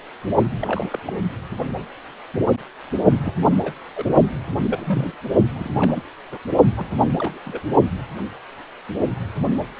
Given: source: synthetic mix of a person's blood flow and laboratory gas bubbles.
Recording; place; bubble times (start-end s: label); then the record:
Doppler ultrasound of blood flow; precordium
0.60-0.86 s: bubbles
0.89-0.99 s: bubbles
1.05-1.13 s: bubbles
3.22-3.33 s: bubbles
3.63-3.73 s: bubbles
3.96-4.06 s: bubbles
4.51-4.56 s: bubbles
4.59-5.15 s: bubbles
5.55-5.69 s: bubbles
5.79-5.92 s: bubbles
5.95-6.02 s: bubbles
6.32-6.38 s: bubbles
6.77-6.85 s: bubbles
7.19-7.39 s: bubbles
7.45-7.62 s: bubbles
From the record:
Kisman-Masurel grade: 221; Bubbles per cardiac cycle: several, 3 to 8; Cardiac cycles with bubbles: 10 to 50%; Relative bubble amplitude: barely perceptible (0.100 to 0.250); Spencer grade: 2 (many but less than half of the cardiac periods contain bubble signals, singularly or in groups); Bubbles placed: only in the low amplitude regions of the cardiac cycle